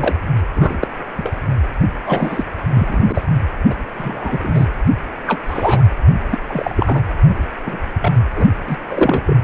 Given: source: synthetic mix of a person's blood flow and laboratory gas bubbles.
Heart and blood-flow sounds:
Doppler ultrasound of blood flow; precordium
0.00-0.15 s: bubbles
0.55-0.77 s: bubbles
0.81-0.87 s: bubbles
1.17-1.36 s: bubbles
2.06-2.44 s: bubbles
2.69-3.24 s: bubbles
3.70-3.74 s: bubbles
3.96-4.67 s: bubbles
5.26-5.40 s: bubbles
5.47-5.83 s: bubbles
6.31-6.38 s: bubbles
6.47-7.01 s: bubbles
7.28-7.37 s: bubbles
7.66-7.77 s: bubbles
8.01-8.12 s: bubbles
8.35-8.46 s: bubbles
8.67-8.77 s: bubbles
8.88-9.23 s: bubbles
9.26-9.37 s: bubbles
From the record:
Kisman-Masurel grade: 243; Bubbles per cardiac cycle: several, 3 to 8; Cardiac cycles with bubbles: 100%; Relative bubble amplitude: loud (0.450 to 0.775); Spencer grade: 3 (all of the cardiac periods contain showers or single bubble signals, but not dominating or overriding the cardiac motion signals); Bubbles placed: anywhere in the cardiac cycle

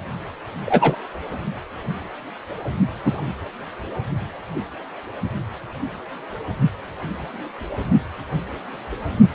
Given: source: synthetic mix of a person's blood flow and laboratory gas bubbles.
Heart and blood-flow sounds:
Doppler ultrasound of blood flow; precordium
0.66-0.97 s: bubbles
3.04-3.21 s: bubbles
From the record:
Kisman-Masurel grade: 123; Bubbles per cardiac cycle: 1 to 2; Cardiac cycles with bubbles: 10 to 50%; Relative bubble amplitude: loud (0.450 to 0.775); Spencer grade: 2 (many but less than half of the cardiac periods contain bubble signals, singularly or in groups); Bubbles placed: only in the low amplitude regions of the cardiac cycle

